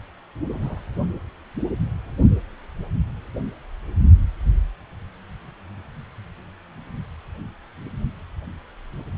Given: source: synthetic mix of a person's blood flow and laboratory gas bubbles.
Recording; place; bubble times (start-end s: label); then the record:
Doppler ultrasound of blood flow; precordium
0.48-0.80 s: bubbles
From the record:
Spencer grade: 1 (occasional bubble signal discernible with the cardiac motion signal, with majority of cardiac periods free of bubbles); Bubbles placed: only in the low amplitude regions of the cardiac cycle